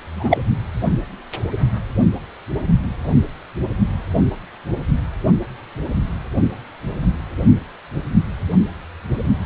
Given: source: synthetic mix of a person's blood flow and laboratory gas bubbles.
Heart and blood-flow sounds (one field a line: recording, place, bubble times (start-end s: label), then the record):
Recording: Doppler ultrasound of blood flow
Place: precordium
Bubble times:
0.16-0.38 s: bubbles
From the record:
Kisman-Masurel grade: 123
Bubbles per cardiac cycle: 1 to 2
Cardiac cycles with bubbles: 10 to 50%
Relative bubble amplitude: loud (0.450 to 0.775)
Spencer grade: 2 (many but less than half of the cardiac periods contain bubble signals, singularly or in groups)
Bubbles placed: only in the low amplitude regions of the cardiac cycle